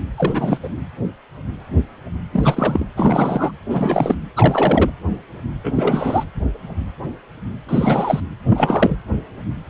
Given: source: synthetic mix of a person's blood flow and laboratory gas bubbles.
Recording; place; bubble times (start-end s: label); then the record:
Doppler ultrasound of blood flow; precordium
0.17-0.58 s: bubbles
0.63-0.69 s: bubbles
2.31-2.85 s: bubbles
2.96-3.52 s: bubbles
3.69-4.16 s: bubbles
4.36-4.90 s: bubbles
5.64-6.24 s: bubbles
7.68-8.20 s: bubbles
8.49-8.96 s: bubbles
From the record:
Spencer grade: 3 (all of the cardiac periods contain showers or single bubble signals, but not dominating or overriding the cardiac motion signals); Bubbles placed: anywhere in the cardiac cycle